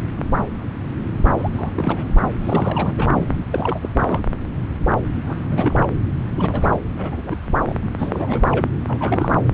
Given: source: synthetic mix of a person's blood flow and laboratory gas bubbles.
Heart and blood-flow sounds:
Doppler ultrasound of blood flow; subclavian vein
1.29-1.34 s: bubbles
1.38-1.48 s: bubbles
1.52-1.71 s: bubbles
1.75-2.14 s: bubbles
2.42-3.44 s: bubbles
3.52-3.89 s: bubbles
3.97-4.20 s: bubbles
5.26-5.43 s: bubbles
5.50-5.86 s: bubbles
6.37-6.81 s: bubbles
6.87-7.36 s: bubbles
7.46-7.54 s: bubbles
7.66-7.79 s: bubbles
7.98-8.66 s: bubbles
8.88-9.35 s: bubbles
From the record:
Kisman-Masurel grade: 332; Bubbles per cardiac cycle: rolling drumbeat, 9 or more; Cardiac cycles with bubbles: 50 to 99%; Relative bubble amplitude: moderate (0.250 to 0.450); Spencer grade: 3 (all of the cardiac periods contain showers or single bubble signals, but not dominating or overriding the cardiac motion signals); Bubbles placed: anywhere in the cardiac cycle

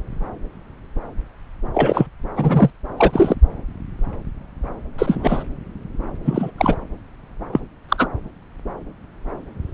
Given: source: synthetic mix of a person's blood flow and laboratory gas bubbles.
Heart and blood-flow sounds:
Doppler ultrasound of blood flow; subclavian vein
1.74-2.06 s: bubbles
2.37-2.70 s: bubbles
2.97-3.35 s: bubbles
4.98-5.43 s: bubbles
6.25-6.51 s: bubbles
6.58-6.75 s: bubbles
7.53-7.60 s: bubbles
7.89-8.07 s: bubbles
From the record:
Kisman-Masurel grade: 223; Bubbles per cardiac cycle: several, 3 to 8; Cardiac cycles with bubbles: 10 to 50%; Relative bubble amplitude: loud (0.450 to 0.775); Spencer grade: 2 (many but less than half of the cardiac periods contain bubble signals, singularly or in groups); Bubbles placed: anywhere in the cardiac cycle

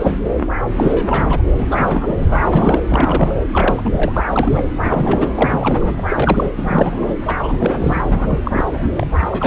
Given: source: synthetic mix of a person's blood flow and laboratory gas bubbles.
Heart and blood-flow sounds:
Doppler ultrasound of blood flow; subclavian vein
0.00-0.30 s: bubbles
0.78-1.42 s: bubbles
1.57-1.67 s: bubbles
1.70-2.45 s: bubbles
2.53-2.81 s: bubbles
2.88-3.36 s: bubbles
3.53-4.23 s: bubbles
4.30-4.70 s: bubbles
4.84-5.88 s: bubbles
5.97-6.01 s: bubbles
6.08-6.50 s: bubbles
6.57-7.15 s: bubbles
7.27-8.03 s: bubbles
8.08-8.39 s: bubbles
8.44-8.64 s: bubbles
8.67-8.82 s: bubbles
8.97-9.07 s: bubbles
9.21-9.47 s: bubbles
From the record:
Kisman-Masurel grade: 342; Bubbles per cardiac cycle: rolling drumbeat, 9 or more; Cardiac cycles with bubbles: 100%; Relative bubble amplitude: moderate (0.250 to 0.450); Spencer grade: 3 (all of the cardiac periods contain showers or single bubble signals, but not dominating or overriding the cardiac motion signals); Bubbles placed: anywhere in the cardiac cycle

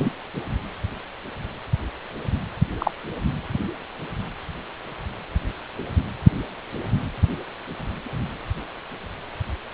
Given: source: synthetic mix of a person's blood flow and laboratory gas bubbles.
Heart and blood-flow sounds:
Doppler ultrasound of blood flow; precordium
0.00-0.10 s: bubbles
2.79-2.92 s: bubbles
From the record:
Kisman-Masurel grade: 123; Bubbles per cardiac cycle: 1 to 2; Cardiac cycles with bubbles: 10 to 50%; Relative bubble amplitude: loud (0.450 to 0.775); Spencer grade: 2 (many but less than half of the cardiac periods contain bubble signals, singularly or in groups); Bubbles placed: anywhere in the cardiac cycle

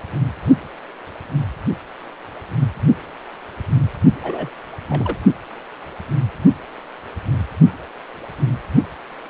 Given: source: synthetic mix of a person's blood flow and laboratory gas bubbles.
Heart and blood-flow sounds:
Doppler ultrasound of blood flow; precordium
4.23-4.50 s: bubbles
4.89-5.17 s: bubbles
From the record:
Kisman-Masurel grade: 211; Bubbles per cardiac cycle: several, 3 to 8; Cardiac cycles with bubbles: 1 to 10%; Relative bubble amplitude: barely perceptible (0.100 to 0.250); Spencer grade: 1 (occasional bubble signal discernible with the cardiac motion signal, with majority of cardiac periods free of bubbles); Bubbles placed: only in the low amplitude regions of the cardiac cycle

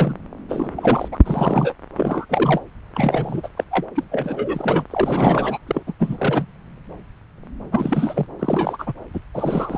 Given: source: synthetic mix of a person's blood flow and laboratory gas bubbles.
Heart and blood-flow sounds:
Doppler ultrasound of blood flow; subclavian vein
0.00-0.15 s: bubbles
0.49-0.69 s: bubbles
0.77-1.08 s: bubbles
1.11-1.18 s: bubbles
1.25-1.73 s: bubbles
1.96-2.25 s: bubbles
2.29-2.60 s: bubbles
2.94-3.48 s: bubbles
3.57-3.64 s: bubbles
3.71-3.86 s: bubbles
3.96-4.04 s: bubbles
4.12-4.84 s: bubbles
4.91-5.58 s: bubbles
5.67-5.83 s: bubbles
5.87-5.93 s: bubbles
5.99-6.46 s: bubbles
7.71-8.27 s: bubbles
8.39-8.93 s: bubbles
9.13-9.20 s: bubbles
9.33-9.78 s: bubbles
From the record:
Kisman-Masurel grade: 332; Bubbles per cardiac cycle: rolling drumbeat, 9 or more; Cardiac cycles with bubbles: 50 to 99%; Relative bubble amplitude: moderate (0.250 to 0.450); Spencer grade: 3 (all of the cardiac periods contain showers or single bubble signals, but not dominating or overriding the cardiac motion signals); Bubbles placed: anywhere in the cardiac cycle

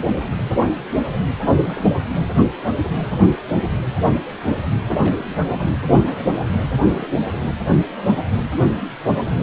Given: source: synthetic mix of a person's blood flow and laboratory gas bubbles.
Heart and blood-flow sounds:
Doppler ultrasound of blood flow; precordium
0.00-0.37 s: bubbles
1.62-1.89 s: bubbles
4.99-5.74 s: bubbles
5.89-6.31 s: bubbles
6.67-6.73 s: bubbles
6.92-7.06 s: bubbles
7.33-7.38 s: bubbles
From the record:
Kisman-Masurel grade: 221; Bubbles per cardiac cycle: several, 3 to 8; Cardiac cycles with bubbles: 10 to 50%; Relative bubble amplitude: barely perceptible (0.100 to 0.250); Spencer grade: 2 (many but less than half of the cardiac periods contain bubble signals, singularly or in groups); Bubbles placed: anywhere in the cardiac cycle

